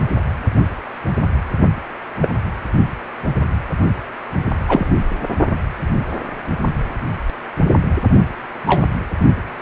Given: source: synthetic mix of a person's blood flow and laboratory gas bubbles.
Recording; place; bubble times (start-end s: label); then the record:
Doppler ultrasound of blood flow; precordium
2.21-2.29 s: bubbles
4.67-4.91 s: bubbles
8.67-8.85 s: bubbles
From the record:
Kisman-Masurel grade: 123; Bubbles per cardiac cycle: 1 to 2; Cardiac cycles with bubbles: 10 to 50%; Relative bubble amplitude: loud (0.450 to 0.775); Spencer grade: 2 (many but less than half of the cardiac periods contain bubble signals, singularly or in groups); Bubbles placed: only in the low amplitude regions of the cardiac cycle